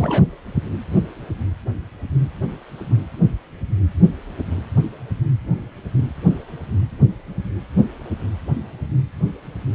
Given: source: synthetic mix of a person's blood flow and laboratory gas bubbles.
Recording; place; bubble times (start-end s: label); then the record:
Doppler ultrasound of blood flow; precordium
0.00-0.24 s: bubbles
From the record:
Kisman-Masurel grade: 212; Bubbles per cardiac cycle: several, 3 to 8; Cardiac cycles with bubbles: 1 to 10%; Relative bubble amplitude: moderate (0.250 to 0.450); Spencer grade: 1 (occasional bubble signal discernible with the cardiac motion signal, with majority of cardiac periods free of bubbles); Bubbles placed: anywhere in the cardiac cycle